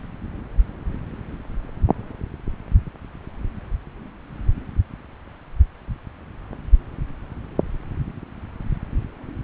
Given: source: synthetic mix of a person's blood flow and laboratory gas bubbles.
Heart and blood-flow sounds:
Doppler ultrasound of blood flow; subclavian vein
no bubbles
From the record:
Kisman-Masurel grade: 000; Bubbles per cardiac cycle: 0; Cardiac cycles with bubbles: 0%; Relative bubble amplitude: no bubbles discernible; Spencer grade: 0 (complete lack of bubble signals)

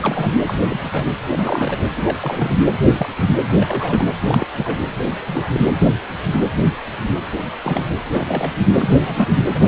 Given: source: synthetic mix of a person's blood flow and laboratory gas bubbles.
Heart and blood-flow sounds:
Doppler ultrasound of blood flow; precordium
0.00-0.39 s: bubbles
0.46-0.55 s: bubbles
0.64-1.04 s: bubbles
1.31-1.77 s: bubbles
1.96-2.17 s: bubbles
2.21-2.54 s: bubbles
2.98-3.09 s: bubbles
3.35-3.44 s: bubbles
3.61-4.04 s: bubbles
4.21-4.47 s: bubbles
4.54-4.79 s: bubbles
4.98-5.12 s: bubbles
5.28-5.50 s: bubbles
5.53-5.61 s: bubbles
7.64-7.85 s: bubbles
8.10-8.56 s: bubbles
8.79-8.96 s: bubbles
9.00-9.35 s: bubbles
9.55-9.68 s: bubbles
From the record:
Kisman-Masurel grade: 232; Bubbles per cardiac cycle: several, 3 to 8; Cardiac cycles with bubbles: 50 to 99%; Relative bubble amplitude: moderate (0.250 to 0.450); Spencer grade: 3 (all of the cardiac periods contain showers or single bubble signals, but not dominating or overriding the cardiac motion signals); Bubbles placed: anywhere in the cardiac cycle

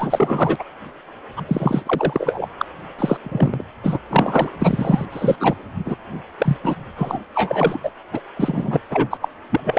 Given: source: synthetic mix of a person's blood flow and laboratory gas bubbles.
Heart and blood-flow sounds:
Doppler ultrasound of blood flow; precordium
0.00-0.64 s: bubbles
1.36-1.42 s: bubbles
1.47-1.82 s: bubbles
1.85-2.46 s: bubbles
2.58-2.65 s: bubbles
2.98-3.17 s: bubbles
3.23-3.64 s: bubbles
3.83-3.99 s: bubbles
4.10-4.52 s: bubbles
4.61-5.06 s: bubbles
5.12-5.36 s: bubbles
5.40-5.57 s: bubbles
5.85-5.97 s: bubbles
6.38-6.57 s: bubbles
6.64-6.76 s: bubbles
6.96-7.19 s: bubbles
7.33-7.80 s: bubbles
7.83-7.91 s: bubbles
8.12-8.21 s: bubbles
8.35-8.81 s: bubbles
8.90-9.17 s: bubbles
9.21-9.29 s: bubbles
9.50-9.60 s: bubbles
9.64-9.78 s: bubbles
From the record:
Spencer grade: 4 (maximum detectable bubble signal sounding continuously throughout systole and diastole of every cardiac period, and overriding the amplitude of the normal cardiac signals); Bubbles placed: anywhere in the cardiac cycle

